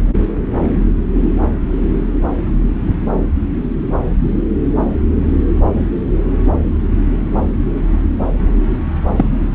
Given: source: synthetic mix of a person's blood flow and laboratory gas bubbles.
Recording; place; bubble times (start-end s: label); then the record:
Doppler ultrasound of blood flow; subclavian vein
9.16-9.25 s: bubbles
From the record:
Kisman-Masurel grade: 113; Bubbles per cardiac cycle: 1 to 2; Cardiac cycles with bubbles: 1 to 10%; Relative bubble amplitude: loud (0.450 to 0.775); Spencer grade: 1 (occasional bubble signal discernible with the cardiac motion signal, with majority of cardiac periods free of bubbles); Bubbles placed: anywhere in the cardiac cycle